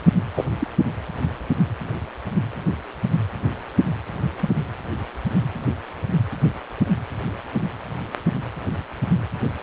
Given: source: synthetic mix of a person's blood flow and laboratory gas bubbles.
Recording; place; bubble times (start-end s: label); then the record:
Doppler ultrasound of blood flow; precordium
0.34-0.45 s: bubbles
0.59-0.70 s: bubbles
4.42-4.49 s: bubbles
From the record:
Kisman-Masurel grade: 112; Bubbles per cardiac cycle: 1 to 2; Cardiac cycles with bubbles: 1 to 10%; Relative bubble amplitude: moderate (0.250 to 0.450); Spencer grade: 1 (occasional bubble signal discernible with the cardiac motion signal, with majority of cardiac periods free of bubbles); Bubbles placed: anywhere in the cardiac cycle